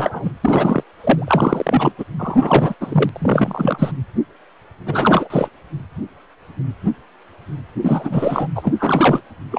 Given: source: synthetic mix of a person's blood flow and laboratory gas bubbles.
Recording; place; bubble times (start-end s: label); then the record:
Doppler ultrasound of blood flow; precordium
0.00-0.32 s: bubbles
0.43-0.83 s: bubbles
1.01-1.92 s: bubbles
1.98-2.04 s: bubbles
2.18-2.75 s: bubbles
2.80-3.09 s: bubbles
3.12-3.92 s: bubbles
4.86-5.48 s: bubbles
7.82-8.47 s: bubbles
8.55-8.73 s: bubbles
8.79-9.21 s: bubbles
9.52-9.59 s: bubbles
From the record:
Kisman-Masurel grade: 332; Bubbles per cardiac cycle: rolling drumbeat, 9 or more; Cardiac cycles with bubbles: 50 to 99%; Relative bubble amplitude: moderate (0.250 to 0.450); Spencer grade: 3 (all of the cardiac periods contain showers or single bubble signals, but not dominating or overriding the cardiac motion signals); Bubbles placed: anywhere in the cardiac cycle